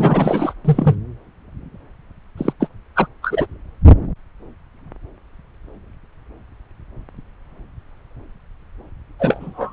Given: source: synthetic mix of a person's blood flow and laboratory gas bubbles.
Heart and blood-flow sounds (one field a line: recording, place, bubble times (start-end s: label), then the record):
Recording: Doppler ultrasound of blood flow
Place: subclavian vein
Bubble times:
0.00-0.54 s: bubbles
0.65-0.95 s: bubbles
2.37-2.53 s: bubbles
2.60-2.68 s: bubbles
2.95-3.07 s: bubbles
3.22-3.46 s: bubbles
9.19-9.72 s: bubbles
From the record:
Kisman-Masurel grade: 223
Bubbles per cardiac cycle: several, 3 to 8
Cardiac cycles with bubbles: 10 to 50%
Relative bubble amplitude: loud (0.450 to 0.775)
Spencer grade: 2 (many but less than half of the cardiac periods contain bubble signals, singularly or in groups)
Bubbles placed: anywhere in the cardiac cycle